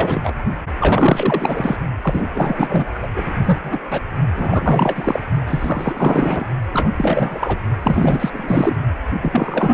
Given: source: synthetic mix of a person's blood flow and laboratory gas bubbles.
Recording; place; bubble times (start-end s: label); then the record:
Doppler ultrasound of blood flow; precordium
0.00-0.20 s: bubbles
0.24-0.34 s: bubbles
0.80-1.77 s: bubbles
2.02-2.29 s: bubbles
2.34-2.87 s: bubbles
2.95-3.08 s: bubbles
3.16-3.33 s: bubbles
3.45-3.58 s: bubbles
3.62-3.79 s: bubbles
3.91-4.00 s: bubbles
4.36-5.20 s: bubbles
5.47-6.46 s: bubbles
6.73-6.90 s: bubbles
6.97-7.58 s: bubbles
7.83-8.30 s: bubbles
8.33-8.76 s: bubbles
9.21-9.74 s: bubbles
From the record:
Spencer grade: 4 (maximum detectable bubble signal sounding continuously throughout systole and diastole of every cardiac period, and overriding the amplitude of the normal cardiac signals); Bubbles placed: only in the low amplitude regions of the cardiac cycle